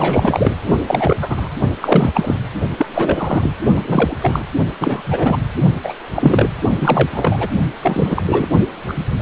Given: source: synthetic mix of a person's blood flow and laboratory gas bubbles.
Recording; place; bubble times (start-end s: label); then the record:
Doppler ultrasound of blood flow; precordium
0.00-0.53 s: bubbles
0.86-1.17 s: bubbles
1.21-1.48 s: bubbles
1.81-2.10 s: bubbles
2.14-2.36 s: bubbles
2.78-3.55 s: bubbles
3.76-4.17 s: bubbles
4.21-4.43 s: bubbles
4.81-5.03 s: bubbles
5.11-5.37 s: bubbles
5.83-5.95 s: bubbles
6.16-6.48 s: bubbles
6.75-7.49 s: bubbles
7.82-8.22 s: bubbles
8.27-8.49 s: bubbles
8.88-8.95 s: bubbles
9.18-9.22 s: bubbles
From the record:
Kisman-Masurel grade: 343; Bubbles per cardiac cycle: rolling drumbeat, 9 or more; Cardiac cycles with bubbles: 100%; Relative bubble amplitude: loud (0.450 to 0.775); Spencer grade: 3 (all of the cardiac periods contain showers or single bubble signals, but not dominating or overriding the cardiac motion signals); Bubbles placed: only in the low amplitude regions of the cardiac cycle